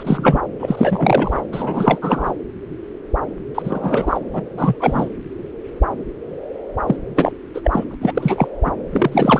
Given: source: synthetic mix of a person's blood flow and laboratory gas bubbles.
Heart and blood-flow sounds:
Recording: Doppler ultrasound of blood flow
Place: subclavian vein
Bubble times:
0.00-0.40 s: bubbles
0.59-1.45 s: bubbles
1.52-1.99 s: bubbles
2.01-2.33 s: bubbles
3.54-4.19 s: bubbles
4.33-4.43 s: bubbles
4.57-4.76 s: bubbles
4.80-5.10 s: bubbles
6.87-6.96 s: bubbles
7.16-7.32 s: bubbles
7.54-7.85 s: bubbles
7.90-7.94 s: bubbles
8.01-8.48 s: bubbles
8.63-8.73 s: bubbles
8.92-9.40 s: bubbles
From the record:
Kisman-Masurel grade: 333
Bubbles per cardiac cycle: rolling drumbeat, 9 or more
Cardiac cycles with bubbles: 50 to 99%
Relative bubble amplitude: loud (0.450 to 0.775)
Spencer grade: 3 (all of the cardiac periods contain showers or single bubble signals, but not dominating or overriding the cardiac motion signals)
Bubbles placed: anywhere in the cardiac cycle

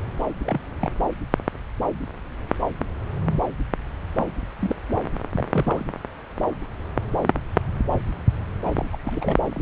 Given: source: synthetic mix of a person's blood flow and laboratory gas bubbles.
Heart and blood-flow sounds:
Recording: Doppler ultrasound of blood flow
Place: subclavian vein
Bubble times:
0.45-0.60 s: bubbles
0.80-0.89 s: bubbles
4.17-4.27 s: bubbles
4.62-4.75 s: bubbles
4.88-4.94 s: bubbles
5.36-5.85 s: bubbles
8.65-8.70 s: bubbles
8.75-8.85 s: bubbles
8.92-8.98 s: bubbles
9.05-9.36 s: bubbles
9.49-9.62 s: bubbles
From the record:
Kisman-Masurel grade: 221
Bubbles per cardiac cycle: several, 3 to 8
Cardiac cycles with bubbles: 10 to 50%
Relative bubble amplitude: barely perceptible (0.100 to 0.250)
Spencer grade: 2 (many but less than half of the cardiac periods contain bubble signals, singularly or in groups)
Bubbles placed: anywhere in the cardiac cycle

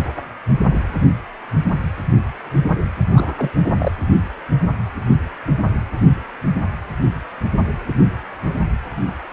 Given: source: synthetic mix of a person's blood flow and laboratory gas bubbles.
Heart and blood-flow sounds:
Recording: Doppler ultrasound of blood flow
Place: precordium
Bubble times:
3.12-3.50 s: bubbles
3.78-3.92 s: bubbles
From the record:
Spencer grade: 1 (occasional bubble signal discernible with the cardiac motion signal, with majority of cardiac periods free of bubbles)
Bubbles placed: anywhere in the cardiac cycle

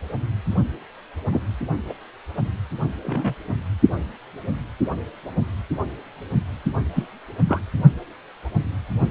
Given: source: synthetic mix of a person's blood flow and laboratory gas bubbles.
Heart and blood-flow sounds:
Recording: Doppler ultrasound of blood flow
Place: precordium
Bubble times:
1.31-1.42 s: bubbles
1.89-1.93 s: bubbles
3.02-3.35 s: bubbles
6.95-7.08 s: bubbles
7.45-7.60 s: bubbles
From the record:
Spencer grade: 2 (many but less than half of the cardiac periods contain bubble signals, singularly or in groups)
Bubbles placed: only in the low amplitude regions of the cardiac cycle

